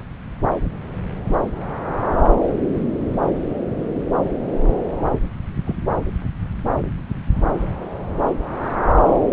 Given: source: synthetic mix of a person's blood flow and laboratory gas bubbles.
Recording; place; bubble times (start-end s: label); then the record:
Doppler ultrasound of blood flow; subclavian vein
5.66-5.75 s: bubbles
From the record:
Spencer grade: 1 (occasional bubble signal discernible with the cardiac motion signal, with majority of cardiac periods free of bubbles); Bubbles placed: anywhere in the cardiac cycle